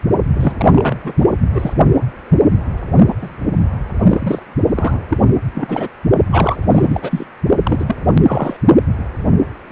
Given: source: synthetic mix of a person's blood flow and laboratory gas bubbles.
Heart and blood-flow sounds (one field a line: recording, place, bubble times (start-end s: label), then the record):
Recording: Doppler ultrasound of blood flow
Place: precordium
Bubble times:
0.33-0.95 s: bubbles
1.04-1.12 s: bubbles
1.19-1.28 s: bubbles
1.54-1.75 s: bubbles
3.08-3.14 s: bubbles
3.21-3.29 s: bubbles
3.97-4.39 s: bubbles
4.76-4.99 s: bubbles
5.08-5.18 s: bubbles
5.54-5.88 s: bubbles
6.32-6.56 s: bubbles
6.71-7.25 s: bubbles
7.63-7.95 s: bubbles
8.26-8.57 s: bubbles
From the record:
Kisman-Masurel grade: 333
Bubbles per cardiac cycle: rolling drumbeat, 9 or more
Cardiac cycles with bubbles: 50 to 99%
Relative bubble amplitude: loud (0.450 to 0.775)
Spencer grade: 3 (all of the cardiac periods contain showers or single bubble signals, but not dominating or overriding the cardiac motion signals)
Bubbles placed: only in the low amplitude regions of the cardiac cycle